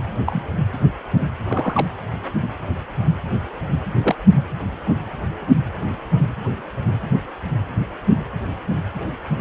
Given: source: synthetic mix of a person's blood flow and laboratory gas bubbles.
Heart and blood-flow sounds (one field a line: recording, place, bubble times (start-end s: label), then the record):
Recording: Doppler ultrasound of blood flow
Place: precordium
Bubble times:
0.26-0.45 s: bubbles
1.47-1.86 s: bubbles
4.03-4.16 s: bubbles
From the record:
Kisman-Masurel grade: 122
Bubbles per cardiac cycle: 1 to 2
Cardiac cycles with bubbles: 10 to 50%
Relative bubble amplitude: moderate (0.250 to 0.450)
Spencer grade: 2 (many but less than half of the cardiac periods contain bubble signals, singularly or in groups)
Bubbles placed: anywhere in the cardiac cycle